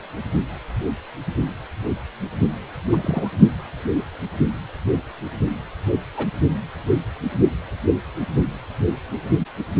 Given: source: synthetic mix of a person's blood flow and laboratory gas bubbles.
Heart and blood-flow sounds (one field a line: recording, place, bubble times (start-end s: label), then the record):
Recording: Doppler ultrasound of blood flow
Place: precordium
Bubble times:
2.92-3.28 s: bubbles
6.17-6.26 s: bubbles
From the record:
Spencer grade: 2 (many but less than half of the cardiac periods contain bubble signals, singularly or in groups)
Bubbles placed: only in the low amplitude regions of the cardiac cycle